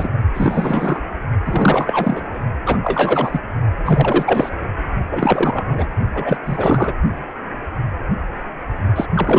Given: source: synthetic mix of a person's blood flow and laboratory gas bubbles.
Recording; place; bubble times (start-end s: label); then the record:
Doppler ultrasound of blood flow; precordium
0.00-0.09 s: bubbles
0.34-1.02 s: bubbles
1.46-2.39 s: bubbles
2.66-2.77 s: bubbles
2.83-3.41 s: bubbles
3.85-4.49 s: bubbles
5.10-5.86 s: bubbles
6.14-6.37 s: bubbles
6.46-6.94 s: bubbles
8.96-9.06 s: bubbles
9.13-9.39 s: bubbles
From the record:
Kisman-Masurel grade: 333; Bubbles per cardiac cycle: rolling drumbeat, 9 or more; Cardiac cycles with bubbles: 50 to 99%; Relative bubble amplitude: loud (0.450 to 0.775); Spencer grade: 3 (all of the cardiac periods contain showers or single bubble signals, but not dominating or overriding the cardiac motion signals); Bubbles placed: only in the low amplitude regions of the cardiac cycle